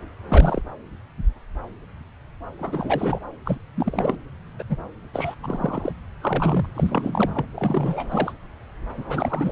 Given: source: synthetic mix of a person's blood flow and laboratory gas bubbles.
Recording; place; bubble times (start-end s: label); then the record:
Doppler ultrasound of blood flow; subclavian vein
0.30-0.62 s: bubbles
2.59-3.20 s: bubbles
3.45-3.58 s: bubbles
3.76-4.17 s: bubbles
4.58-4.63 s: bubbles
4.69-4.77 s: bubbles
5.13-5.35 s: bubbles
5.42-5.92 s: bubbles
6.21-6.66 s: bubbles
6.75-7.30 s: bubbles
7.34-7.45 s: bubbles
7.55-8.33 s: bubbles
8.96-9.52 s: bubbles
From the record:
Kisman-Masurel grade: 332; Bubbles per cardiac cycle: rolling drumbeat, 9 or more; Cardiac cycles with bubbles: 50 to 99%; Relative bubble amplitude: moderate (0.250 to 0.450); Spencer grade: 3 (all of the cardiac periods contain showers or single bubble signals, but not dominating or overriding the cardiac motion signals); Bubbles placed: anywhere in the cardiac cycle